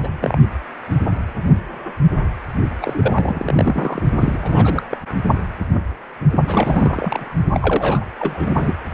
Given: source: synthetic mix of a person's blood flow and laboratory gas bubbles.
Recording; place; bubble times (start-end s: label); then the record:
Doppler ultrasound of blood flow; precordium
0.03-0.09 s: bubbles
0.21-0.36 s: bubbles
2.82-4.03 s: bubbles
4.17-4.83 s: bubbles
4.91-4.97 s: bubbles
6.46-7.36 s: bubbles
7.54-8.05 s: bubbles
8.19-8.74 s: bubbles
From the record:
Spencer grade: 3 (all of the cardiac periods contain showers or single bubble signals, but not dominating or overriding the cardiac motion signals); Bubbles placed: only in the low amplitude regions of the cardiac cycle